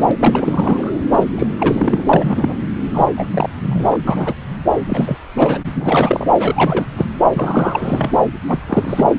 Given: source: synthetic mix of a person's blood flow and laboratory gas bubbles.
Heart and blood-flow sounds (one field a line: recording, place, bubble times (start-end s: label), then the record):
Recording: Doppler ultrasound of blood flow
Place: subclavian vein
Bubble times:
0.00-0.11 s: bubbles
0.20-0.93 s: bubbles
1.11-1.24 s: bubbles
1.38-1.46 s: bubbles
1.58-2.02 s: bubbles
2.09-2.67 s: bubbles
2.94-3.09 s: bubbles
3.15-3.27 s: bubbles
3.33-3.50 s: bubbles
3.62-3.98 s: bubbles
4.07-4.45 s: bubbles
4.89-5.18 s: bubbles
5.37-5.58 s: bubbles
5.74-6.27 s: bubbles
6.36-6.86 s: bubbles
6.96-7.06 s: bubbles
7.33-8.12 s: bubbles
8.48-8.61 s: bubbles
8.67-9.14 s: bubbles
From the record:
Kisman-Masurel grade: 342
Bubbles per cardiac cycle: rolling drumbeat, 9 or more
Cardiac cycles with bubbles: 100%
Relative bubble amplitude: moderate (0.250 to 0.450)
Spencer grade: 3 (all of the cardiac periods contain showers or single bubble signals, but not dominating or overriding the cardiac motion signals)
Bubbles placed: anywhere in the cardiac cycle